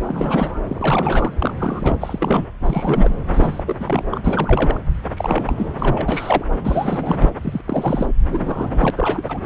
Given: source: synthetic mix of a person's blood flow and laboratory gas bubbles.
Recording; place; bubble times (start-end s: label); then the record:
Doppler ultrasound of blood flow; subclavian vein
0.07-0.59 s: bubbles
0.68-1.31 s: bubbles
1.39-1.54 s: bubbles
1.59-1.96 s: bubbles
2.00-2.45 s: bubbles
2.63-3.10 s: bubbles
3.33-3.63 s: bubbles
3.66-4.80 s: bubbles
5.17-5.73 s: bubbles
5.79-6.45 s: bubbles
6.63-7.30 s: bubbles
7.42-7.61 s: bubbles
7.64-8.07 s: bubbles
8.29-8.91 s: bubbles
8.96-9.40 s: bubbles
From the record:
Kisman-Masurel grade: 342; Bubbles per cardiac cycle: rolling drumbeat, 9 or more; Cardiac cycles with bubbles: 100%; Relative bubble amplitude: moderate (0.250 to 0.450); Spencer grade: 3 (all of the cardiac periods contain showers or single bubble signals, but not dominating or overriding the cardiac motion signals); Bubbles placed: anywhere in the cardiac cycle